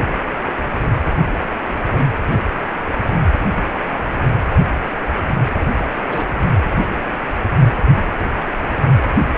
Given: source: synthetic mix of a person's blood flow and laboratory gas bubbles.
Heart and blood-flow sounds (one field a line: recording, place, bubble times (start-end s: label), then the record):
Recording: Doppler ultrasound of blood flow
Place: precordium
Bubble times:
5.60-5.65 s: bubbles
6.08-6.35 s: bubbles
From the record:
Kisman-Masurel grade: 121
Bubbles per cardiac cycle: 1 to 2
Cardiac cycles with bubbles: 10 to 50%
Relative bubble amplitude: barely perceptible (0.100 to 0.250)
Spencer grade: 2 (many but less than half of the cardiac periods contain bubble signals, singularly or in groups)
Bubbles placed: anywhere in the cardiac cycle